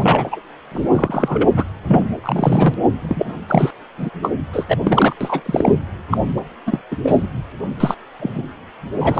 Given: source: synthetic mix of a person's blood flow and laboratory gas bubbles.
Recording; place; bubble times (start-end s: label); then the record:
Doppler ultrasound of blood flow; precordium
0.00-0.41 s: bubbles
0.71-0.86 s: bubbles
0.91-1.48 s: bubbles
1.56-1.64 s: bubbles
1.87-2.06 s: bubbles
2.24-2.75 s: bubbles
3.00-3.33 s: bubbles
3.48-3.71 s: bubbles
3.98-4.09 s: bubbles
4.22-4.31 s: bubbles
4.52-4.78 s: bubbles
4.84-5.16 s: bubbles
5.21-5.42 s: bubbles
5.46-5.72 s: bubbles
6.10-6.17 s: bubbles
6.37-6.42 s: bubbles
6.66-6.82 s: bubbles
6.91-6.96 s: bubbles
7.02-7.26 s: bubbles
7.80-7.94 s: bubbles
8.20-8.44 s: bubbles
9.00-9.20 s: bubbles
From the record:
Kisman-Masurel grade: 243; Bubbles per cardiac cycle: several, 3 to 8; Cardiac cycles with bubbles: 100%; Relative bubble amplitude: loud (0.450 to 0.775); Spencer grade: 3 (all of the cardiac periods contain showers or single bubble signals, but not dominating or overriding the cardiac motion signals); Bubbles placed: anywhere in the cardiac cycle